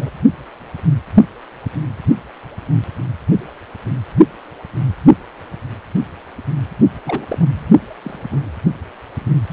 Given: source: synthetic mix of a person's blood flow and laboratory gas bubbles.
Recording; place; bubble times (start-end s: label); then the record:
Doppler ultrasound of blood flow; precordium
0.01-0.10 s: bubbles
7.06-7.25 s: bubbles
7.29-7.65 s: bubbles
8.03-8.19 s: bubbles
8.30-8.44 s: bubbles
From the record:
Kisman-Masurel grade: 221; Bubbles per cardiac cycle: several, 3 to 8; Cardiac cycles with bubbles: 10 to 50%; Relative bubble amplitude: barely perceptible (0.100 to 0.250); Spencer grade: 2 (many but less than half of the cardiac periods contain bubble signals, singularly or in groups); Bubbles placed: only in the low amplitude regions of the cardiac cycle